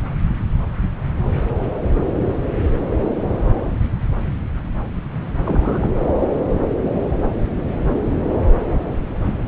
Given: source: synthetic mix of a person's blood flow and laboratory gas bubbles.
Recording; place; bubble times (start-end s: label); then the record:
Doppler ultrasound of blood flow; subclavian vein
5.45-5.89 s: bubbles
From the record:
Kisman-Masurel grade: 112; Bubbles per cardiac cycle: 1 to 2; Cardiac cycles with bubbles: 1 to 10%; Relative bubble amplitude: moderate (0.250 to 0.450); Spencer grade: 1 (occasional bubble signal discernible with the cardiac motion signal, with majority of cardiac periods free of bubbles); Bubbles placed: anywhere in the cardiac cycle